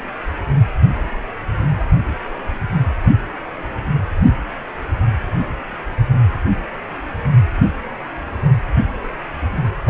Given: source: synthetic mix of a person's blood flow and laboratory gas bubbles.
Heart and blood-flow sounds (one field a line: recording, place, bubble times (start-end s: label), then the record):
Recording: Doppler ultrasound of blood flow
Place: precordium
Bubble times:
9.86-9.90 s: bubbles
From the record:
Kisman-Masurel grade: 211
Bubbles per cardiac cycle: several, 3 to 8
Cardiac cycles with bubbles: 1 to 10%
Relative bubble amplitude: barely perceptible (0.100 to 0.250)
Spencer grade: 1 (occasional bubble signal discernible with the cardiac motion signal, with majority of cardiac periods free of bubbles)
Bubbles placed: anywhere in the cardiac cycle